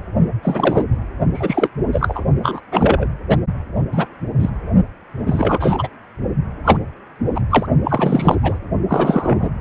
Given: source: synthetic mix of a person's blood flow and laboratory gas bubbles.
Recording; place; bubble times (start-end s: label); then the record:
Doppler ultrasound of blood flow; precordium
0.43-0.85 s: bubbles
1.34-1.69 s: bubbles
1.92-2.24 s: bubbles
2.42-2.61 s: bubbles
2.71-3.08 s: bubbles
3.29-3.36 s: bubbles
3.92-4.06 s: bubbles
4.39-4.50 s: bubbles
5.26-5.88 s: bubbles
6.64-6.77 s: bubbles
7.34-7.42 s: bubbles
7.50-7.67 s: bubbles
7.84-8.36 s: bubbles
8.42-8.59 s: bubbles
8.88-9.50 s: bubbles
From the record:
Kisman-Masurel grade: 243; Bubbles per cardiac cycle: several, 3 to 8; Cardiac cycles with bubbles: 100%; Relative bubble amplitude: loud (0.450 to 0.775); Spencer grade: 3 (all of the cardiac periods contain showers or single bubble signals, but not dominating or overriding the cardiac motion signals); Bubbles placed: only in the low amplitude regions of the cardiac cycle